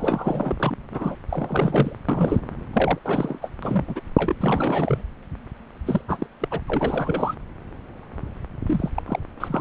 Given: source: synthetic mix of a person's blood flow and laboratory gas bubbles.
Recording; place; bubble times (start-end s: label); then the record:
Doppler ultrasound of blood flow; subclavian vein
0.00-0.77 s: bubbles
0.91-1.19 s: bubbles
1.29-1.97 s: bubbles
2.08-2.40 s: bubbles
2.73-2.98 s: bubbles
3.04-3.50 s: bubbles
3.62-4.02 s: bubbles
4.16-4.34 s: bubbles
4.40-5.03 s: bubbles
5.86-6.01 s: bubbles
6.08-6.27 s: bubbles
6.42-6.60 s: bubbles
6.66-7.35 s: bubbles
8.66-8.90 s: bubbles
8.95-9.02 s: bubbles
9.06-9.20 s: bubbles
9.40-9.61 s: bubbles
From the record:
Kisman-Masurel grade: 332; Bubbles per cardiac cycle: rolling drumbeat, 9 or more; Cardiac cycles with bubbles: 50 to 99%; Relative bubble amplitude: moderate (0.250 to 0.450); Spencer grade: 3 (all of the cardiac periods contain showers or single bubble signals, but not dominating or overriding the cardiac motion signals); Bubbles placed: anywhere in the cardiac cycle